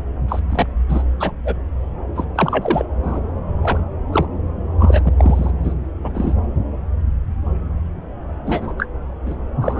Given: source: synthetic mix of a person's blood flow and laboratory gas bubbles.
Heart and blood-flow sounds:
Doppler ultrasound of blood flow; subclavian vein
0.28-0.40 s: bubbles
0.49-0.66 s: bubbles
0.89-1.03 s: bubbles
1.20-1.31 s: bubbles
1.45-1.55 s: bubbles
2.15-2.25 s: bubbles
2.35-2.85 s: bubbles
3.02-3.21 s: bubbles
3.62-3.78 s: bubbles
4.12-4.25 s: bubbles
4.79-5.13 s: bubbles
5.17-5.51 s: bubbles
5.63-5.75 s: bubbles
6.04-6.10 s: bubbles
6.14-6.34 s: bubbles
8.46-8.73 s: bubbles
8.78-8.86 s: bubbles
9.26-9.36 s: bubbles
9.62-9.80 s: bubbles
From the record:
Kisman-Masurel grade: 233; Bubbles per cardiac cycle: several, 3 to 8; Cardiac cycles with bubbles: 50 to 99%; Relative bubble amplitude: loud (0.450 to 0.775); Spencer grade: 3 (all of the cardiac periods contain showers or single bubble signals, but not dominating or overriding the cardiac motion signals); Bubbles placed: anywhere in the cardiac cycle

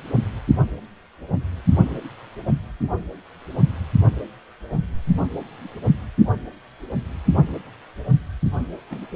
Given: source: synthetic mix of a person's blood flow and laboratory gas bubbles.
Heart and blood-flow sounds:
Doppler ultrasound of blood flow; precordium
8.90-9.06 s: bubbles
From the record:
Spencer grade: 1 (occasional bubble signal discernible with the cardiac motion signal, with majority of cardiac periods free of bubbles); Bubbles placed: anywhere in the cardiac cycle

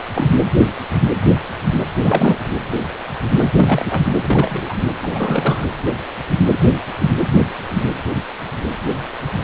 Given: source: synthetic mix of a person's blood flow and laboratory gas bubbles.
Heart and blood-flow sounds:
Doppler ultrasound of blood flow; precordium
0.14-0.28 s: bubbles
2.02-2.40 s: bubbles
3.38-3.48 s: bubbles
3.57-4.02 s: bubbles
4.23-4.74 s: bubbles
5.02-5.67 s: bubbles
From the record:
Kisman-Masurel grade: 222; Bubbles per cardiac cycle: several, 3 to 8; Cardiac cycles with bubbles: 10 to 50%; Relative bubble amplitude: moderate (0.250 to 0.450); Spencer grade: 2 (many but less than half of the cardiac periods contain bubble signals, singularly or in groups); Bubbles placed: anywhere in the cardiac cycle

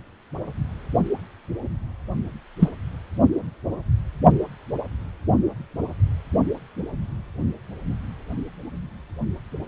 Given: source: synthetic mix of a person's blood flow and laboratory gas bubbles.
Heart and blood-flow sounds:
Doppler ultrasound of blood flow; precordium
2.59-2.69 s: bubbles
From the record:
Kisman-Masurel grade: 113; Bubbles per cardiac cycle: 1 to 2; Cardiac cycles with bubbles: 1 to 10%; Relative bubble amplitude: loud (0.450 to 0.775); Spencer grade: 1 (occasional bubble signal discernible with the cardiac motion signal, with majority of cardiac periods free of bubbles); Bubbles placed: only in the low amplitude regions of the cardiac cycle

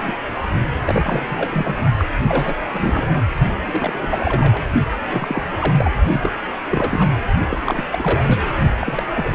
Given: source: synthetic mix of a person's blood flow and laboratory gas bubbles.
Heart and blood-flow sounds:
Doppler ultrasound of blood flow; precordium
0.03-0.13 s: bubbles
0.84-1.75 s: bubbles
1.97-2.05 s: bubbles
2.26-2.54 s: bubbles
2.69-3.24 s: bubbles
3.66-4.64 s: bubbles
5.06-5.42 s: bubbles
5.50-5.93 s: bubbles
6.12-6.31 s: bubbles
6.69-7.08 s: bubbles
7.50-7.84 s: bubbles
7.91-8.43 s: bubbles
8.79-9.03 s: bubbles
9.14-9.35 s: bubbles
From the record:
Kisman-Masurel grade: 342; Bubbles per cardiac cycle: rolling drumbeat, 9 or more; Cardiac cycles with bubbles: 100%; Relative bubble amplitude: moderate (0.250 to 0.450); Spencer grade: 3 (all of the cardiac periods contain showers or single bubble signals, but not dominating or overriding the cardiac motion signals); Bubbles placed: only in the low amplitude regions of the cardiac cycle

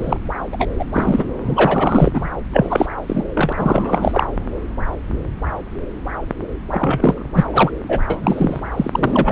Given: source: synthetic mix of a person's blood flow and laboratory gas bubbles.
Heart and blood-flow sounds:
Doppler ultrasound of blood flow; subclavian vein
0.00-0.16 s: bubbles
0.52-0.69 s: bubbles
0.78-0.85 s: bubbles
0.92-1.28 s: bubbles
1.44-2.28 s: bubbles
2.53-2.86 s: bubbles
3.07-3.24 s: bubbles
3.34-3.53 s: bubbles
3.56-4.27 s: bubbles
6.71-7.23 s: bubbles
7.33-7.45 s: bubbles
7.50-7.71 s: bubbles
7.88-8.00 s: bubbles
8.10-8.61 s: bubbles
8.77-9.32 s: bubbles
From the record:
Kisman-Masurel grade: 333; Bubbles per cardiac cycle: rolling drumbeat, 9 or more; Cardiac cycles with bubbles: 50 to 99%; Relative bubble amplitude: loud (0.450 to 0.775); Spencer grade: 3 (all of the cardiac periods contain showers or single bubble signals, but not dominating or overriding the cardiac motion signals); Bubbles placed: anywhere in the cardiac cycle

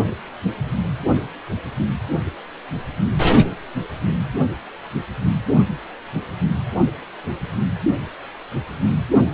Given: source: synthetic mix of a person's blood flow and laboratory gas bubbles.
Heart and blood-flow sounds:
Doppler ultrasound of blood flow; precordium
no bubbles
From the record:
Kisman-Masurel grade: 000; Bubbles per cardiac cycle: 0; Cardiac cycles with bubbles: 0%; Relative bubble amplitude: no bubbles discernible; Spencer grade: 0 (complete lack of bubble signals)

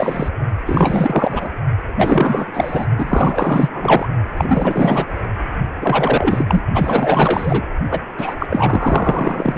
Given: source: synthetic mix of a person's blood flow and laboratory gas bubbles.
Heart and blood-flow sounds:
Doppler ultrasound of blood flow; precordium
0.00-0.28 s: bubbles
0.66-1.49 s: bubbles
1.97-2.86 s: bubbles
2.98-4.07 s: bubbles
4.37-5.05 s: bubbles
5.81-6.44 s: bubbles
6.47-6.64 s: bubbles
6.74-7.61 s: bubbles
7.90-8.00 s: bubbles
8.18-8.34 s: bubbles
8.39-8.46 s: bubbles
8.49-9.58 s: bubbles
From the record:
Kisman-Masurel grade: 444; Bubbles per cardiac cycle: continuous sound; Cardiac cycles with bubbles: 100%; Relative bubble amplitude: maximal (0.775 to 0.999); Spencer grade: 4 (maximum detectable bubble signal sounding continuously throughout systole and diastole of every cardiac period, and overriding the amplitude of the normal cardiac signals); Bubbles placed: only in the low amplitude regions of the cardiac cycle

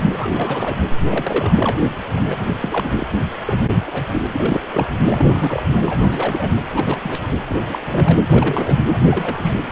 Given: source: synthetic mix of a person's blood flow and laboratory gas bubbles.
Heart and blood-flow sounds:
Doppler ultrasound of blood flow; precordium
0.00-0.02 s: bubbles
0.12-0.77 s: bubbles
1.01-1.79 s: bubbles
2.16-2.21 s: bubbles
2.27-2.44 s: bubbles
2.60-3.07 s: bubbles
3.10-3.19 s: bubbles
3.46-3.75 s: bubbles
3.86-4.04 s: bubbles
4.09-4.27 s: bubbles
4.33-4.61 s: bubbles
4.72-4.88 s: bubbles
5.10-5.62 s: bubbles
5.70-6.52 s: bubbles
6.70-7.21 s: bubbles
7.49-7.56 s: bubbles
7.60-7.79 s: bubbles
7.82-8.18 s: bubbles
8.29-8.77 s: bubbles
8.92-9.54 s: bubbles
9.67-9.71 s: bubbles
From the record:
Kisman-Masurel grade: 342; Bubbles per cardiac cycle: rolling drumbeat, 9 or more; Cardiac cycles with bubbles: 100%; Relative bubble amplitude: moderate (0.250 to 0.450); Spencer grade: 3 (all of the cardiac periods contain showers or single bubble signals, but not dominating or overriding the cardiac motion signals); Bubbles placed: anywhere in the cardiac cycle

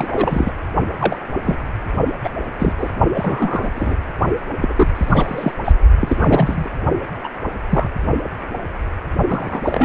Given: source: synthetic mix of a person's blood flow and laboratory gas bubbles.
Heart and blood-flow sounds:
Doppler ultrasound of blood flow; precordium
0.00-0.52 s: bubbles
0.99-1.16 s: bubbles
1.45-1.56 s: bubbles
2.24-2.29 s: bubbles
2.59-2.75 s: bubbles
2.78-2.91 s: bubbles
3.14-3.71 s: bubbles
3.76-3.96 s: bubbles
4.62-4.88 s: bubbles
4.95-5.52 s: bubbles
5.64-5.73 s: bubbles
6.00-6.70 s: bubbles
7.24-7.29 s: bubbles
7.70-7.89 s: bubbles
9.28-9.84 s: bubbles
From the record:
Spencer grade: 3 (all of the cardiac periods contain showers or single bubble signals, but not dominating or overriding the cardiac motion signals); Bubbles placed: only in the low amplitude regions of the cardiac cycle

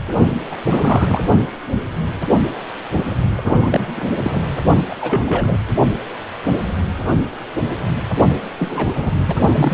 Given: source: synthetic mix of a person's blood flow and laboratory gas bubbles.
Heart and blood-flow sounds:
Doppler ultrasound of blood flow; precordium
0.52-0.57 s: bubbles
0.65-1.28 s: bubbles
3.38-4.06 s: bubbles
4.24-4.41 s: bubbles
4.89-4.95 s: bubbles
5.00-5.58 s: bubbles
8.58-9.12 s: bubbles
9.17-9.36 s: bubbles
9.54-9.74 s: bubbles
From the record:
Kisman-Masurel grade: 332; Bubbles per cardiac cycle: rolling drumbeat, 9 or more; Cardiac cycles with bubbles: 50 to 99%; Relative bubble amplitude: moderate (0.250 to 0.450); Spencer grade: 3 (all of the cardiac periods contain showers or single bubble signals, but not dominating or overriding the cardiac motion signals); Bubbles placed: only in the low amplitude regions of the cardiac cycle

